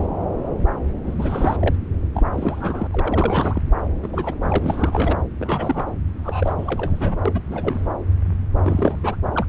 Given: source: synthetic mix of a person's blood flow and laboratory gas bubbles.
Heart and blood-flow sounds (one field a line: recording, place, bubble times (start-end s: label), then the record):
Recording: Doppler ultrasound of blood flow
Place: subclavian vein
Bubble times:
0.00-0.07 s: bubbles
1.02-1.75 s: bubbles
2.14-2.87 s: bubbles
2.90-3.62 s: bubbles
4.03-4.36 s: bubbles
4.42-5.17 s: bubbles
5.39-5.91 s: bubbles
6.23-7.17 s: bubbles
7.25-7.40 s: bubbles
7.50-7.88 s: bubbles
8.64-9.16 s: bubbles
9.32-9.46 s: bubbles
From the record:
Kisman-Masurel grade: 332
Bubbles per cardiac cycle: rolling drumbeat, 9 or more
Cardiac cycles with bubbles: 50 to 99%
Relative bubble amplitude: moderate (0.250 to 0.450)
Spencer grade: 3 (all of the cardiac periods contain showers or single bubble signals, but not dominating or overriding the cardiac motion signals)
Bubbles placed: anywhere in the cardiac cycle